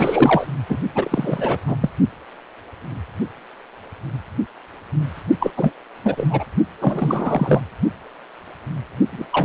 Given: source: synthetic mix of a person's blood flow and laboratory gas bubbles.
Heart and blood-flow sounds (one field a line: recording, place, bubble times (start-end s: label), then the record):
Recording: Doppler ultrasound of blood flow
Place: precordium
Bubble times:
0.00-0.46 s: bubbles
0.69-0.78 s: bubbles
0.94-1.58 s: bubbles
1.67-1.76 s: bubbles
1.81-1.90 s: bubbles
5.40-5.51 s: bubbles
5.57-5.74 s: bubbles
6.04-6.45 s: bubbles
6.80-7.61 s: bubbles
9.12-9.26 s: bubbles
9.32-9.45 s: bubbles
From the record:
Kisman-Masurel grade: 333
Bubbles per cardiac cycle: rolling drumbeat, 9 or more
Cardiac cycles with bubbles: 50 to 99%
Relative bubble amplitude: loud (0.450 to 0.775)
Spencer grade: 3 (all of the cardiac periods contain showers or single bubble signals, but not dominating or overriding the cardiac motion signals)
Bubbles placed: only in the low amplitude regions of the cardiac cycle